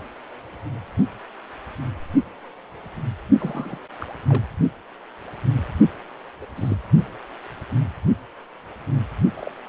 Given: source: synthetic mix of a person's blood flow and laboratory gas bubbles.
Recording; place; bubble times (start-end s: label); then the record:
Doppler ultrasound of blood flow; precordium
3.40-3.79 s: bubbles
4.01-4.05 s: bubbles
4.29-4.43 s: bubbles
6.41-6.46 s: bubbles
6.55-6.75 s: bubbles
9.37-9.52 s: bubbles
From the record:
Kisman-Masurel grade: 221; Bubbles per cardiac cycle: several, 3 to 8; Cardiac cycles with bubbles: 10 to 50%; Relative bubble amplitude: barely perceptible (0.100 to 0.250); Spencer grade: 2 (many but less than half of the cardiac periods contain bubble signals, singularly or in groups); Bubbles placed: only in the low amplitude regions of the cardiac cycle